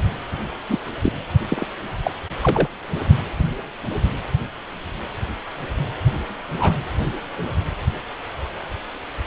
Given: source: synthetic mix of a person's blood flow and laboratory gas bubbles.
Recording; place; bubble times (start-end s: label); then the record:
Doppler ultrasound of blood flow; precordium
0.69-0.78 s: bubbles
1.03-1.12 s: bubbles
1.49-1.67 s: bubbles
2.04-2.11 s: bubbles
2.42-2.68 s: bubbles
6.60-6.73 s: bubbles
From the record:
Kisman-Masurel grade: 122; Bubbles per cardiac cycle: 1 to 2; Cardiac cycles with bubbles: 10 to 50%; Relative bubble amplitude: moderate (0.250 to 0.450); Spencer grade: 2 (many but less than half of the cardiac periods contain bubble signals, singularly or in groups); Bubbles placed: anywhere in the cardiac cycle